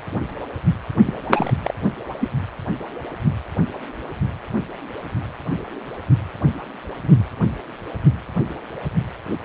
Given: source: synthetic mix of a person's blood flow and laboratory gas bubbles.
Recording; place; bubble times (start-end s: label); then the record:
Doppler ultrasound of blood flow; precordium
1.06-1.20 s: bubbles
1.29-1.53 s: bubbles
1.64-1.74 s: bubbles
2.20-2.28 s: bubbles
From the record:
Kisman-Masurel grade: 222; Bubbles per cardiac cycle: several, 3 to 8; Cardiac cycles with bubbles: 10 to 50%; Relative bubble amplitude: moderate (0.250 to 0.450); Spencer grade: 2 (many but less than half of the cardiac periods contain bubble signals, singularly or in groups); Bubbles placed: anywhere in the cardiac cycle